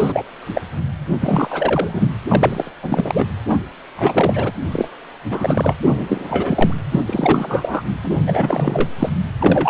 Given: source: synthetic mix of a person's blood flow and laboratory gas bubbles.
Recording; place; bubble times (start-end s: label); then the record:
Doppler ultrasound of blood flow; precordium
0.00-0.25 s: bubbles
0.54-0.61 s: bubbles
1.20-2.17 s: bubbles
2.29-2.71 s: bubbles
2.82-3.26 s: bubbles
3.48-3.58 s: bubbles
3.96-4.53 s: bubbles
4.71-4.88 s: bubbles
5.29-5.75 s: bubbles
5.82-5.84 s: bubbles
5.96-6.74 s: bubbles
6.92-7.00 s: bubbles
7.07-7.82 s: bubbles
8.02-8.22 s: bubbles
8.26-8.89 s: bubbles
8.99-9.09 s: bubbles
9.40-9.70 s: bubbles
From the record:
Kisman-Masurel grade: 343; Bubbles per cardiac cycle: rolling drumbeat, 9 or more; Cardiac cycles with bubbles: 100%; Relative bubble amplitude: loud (0.450 to 0.775); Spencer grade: 3 (all of the cardiac periods contain showers or single bubble signals, but not dominating or overriding the cardiac motion signals); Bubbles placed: anywhere in the cardiac cycle